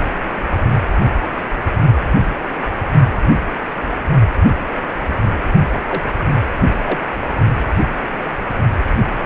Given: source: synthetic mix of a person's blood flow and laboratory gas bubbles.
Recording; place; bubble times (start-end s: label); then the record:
Doppler ultrasound of blood flow; precordium
5.72-5.82 s: bubbles
5.88-6.02 s: bubbles
6.18-6.26 s: bubbles
6.84-7.00 s: bubbles
From the record:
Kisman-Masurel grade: 222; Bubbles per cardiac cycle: several, 3 to 8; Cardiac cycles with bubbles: 10 to 50%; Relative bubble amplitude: moderate (0.250 to 0.450); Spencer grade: 2 (many but less than half of the cardiac periods contain bubble signals, singularly or in groups); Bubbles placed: only in the low amplitude regions of the cardiac cycle